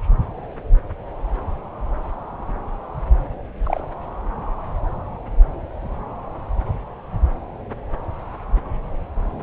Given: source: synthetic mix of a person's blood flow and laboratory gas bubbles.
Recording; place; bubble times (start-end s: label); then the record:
Doppler ultrasound of blood flow; subclavian vein
3.63-3.81 s: bubbles
From the record:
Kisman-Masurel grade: 112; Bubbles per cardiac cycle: 1 to 2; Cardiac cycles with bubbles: 1 to 10%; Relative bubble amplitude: moderate (0.250 to 0.450); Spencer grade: 1 (occasional bubble signal discernible with the cardiac motion signal, with majority of cardiac periods free of bubbles); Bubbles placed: anywhere in the cardiac cycle